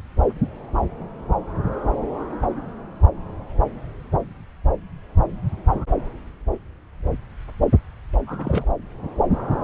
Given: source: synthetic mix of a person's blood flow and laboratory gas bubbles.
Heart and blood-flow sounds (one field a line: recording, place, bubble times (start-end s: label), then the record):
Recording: Doppler ultrasound of blood flow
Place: subclavian vein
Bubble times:
8.27-8.72 s: bubbles
From the record:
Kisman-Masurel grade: 211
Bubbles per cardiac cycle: several, 3 to 8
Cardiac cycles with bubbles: 1 to 10%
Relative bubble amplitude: barely perceptible (0.100 to 0.250)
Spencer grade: 1 (occasional bubble signal discernible with the cardiac motion signal, with majority of cardiac periods free of bubbles)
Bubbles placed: anywhere in the cardiac cycle